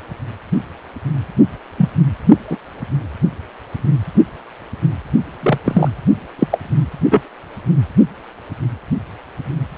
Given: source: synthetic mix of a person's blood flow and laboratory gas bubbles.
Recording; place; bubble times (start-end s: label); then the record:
Doppler ultrasound of blood flow; precordium
1.77-1.89 s: bubbles
2.50-2.57 s: bubbles
5.42-5.58 s: bubbles
5.65-5.88 s: bubbles
6.39-6.47 s: bubbles
6.51-6.59 s: bubbles
7.11-7.21 s: bubbles
From the record:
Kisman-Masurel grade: 123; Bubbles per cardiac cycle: 1 to 2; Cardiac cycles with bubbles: 10 to 50%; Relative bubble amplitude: loud (0.450 to 0.775); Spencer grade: 2 (many but less than half of the cardiac periods contain bubble signals, singularly or in groups); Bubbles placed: only in the low amplitude regions of the cardiac cycle